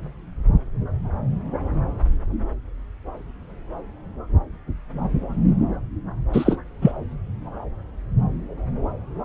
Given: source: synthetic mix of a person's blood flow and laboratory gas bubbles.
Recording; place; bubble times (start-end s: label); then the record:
Doppler ultrasound of blood flow; subclavian vein
6.33-6.56 s: bubbles
6.81-6.92 s: bubbles
From the record:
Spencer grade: 1 (occasional bubble signal discernible with the cardiac motion signal, with majority of cardiac periods free of bubbles); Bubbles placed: anywhere in the cardiac cycle